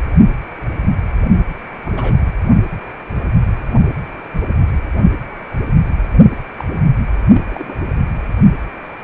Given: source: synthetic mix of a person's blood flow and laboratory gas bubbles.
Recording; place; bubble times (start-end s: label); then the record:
Doppler ultrasound of blood flow; precordium
1.84-2.16 s: bubbles
6.58-6.63 s: bubbles
6.69-6.83 s: bubbles
7.33-7.79 s: bubbles
From the record:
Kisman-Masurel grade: 221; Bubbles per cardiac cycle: several, 3 to 8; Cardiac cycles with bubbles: 10 to 50%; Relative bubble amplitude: barely perceptible (0.100 to 0.250); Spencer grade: 2 (many but less than half of the cardiac periods contain bubble signals, singularly or in groups); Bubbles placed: only in the low amplitude regions of the cardiac cycle